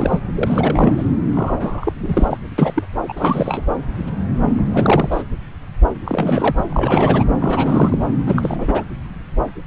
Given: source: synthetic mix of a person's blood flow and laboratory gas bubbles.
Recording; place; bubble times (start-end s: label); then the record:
Doppler ultrasound of blood flow; subclavian vein
0.00-0.19 s: bubbles
0.35-1.04 s: bubbles
1.34-1.93 s: bubbles
2.02-2.38 s: bubbles
2.58-2.83 s: bubbles
3.08-3.13 s: bubbles
3.17-3.64 s: bubbles
4.58-5.23 s: bubbles
6.05-6.63 s: bubbles
6.70-7.24 s: bubbles
7.40-7.98 s: bubbles
8.26-8.85 s: bubbles
From the record:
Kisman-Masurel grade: 333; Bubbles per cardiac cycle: rolling drumbeat, 9 or more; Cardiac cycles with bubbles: 50 to 99%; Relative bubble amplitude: loud (0.450 to 0.775); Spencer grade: 3 (all of the cardiac periods contain showers or single bubble signals, but not dominating or overriding the cardiac motion signals); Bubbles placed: anywhere in the cardiac cycle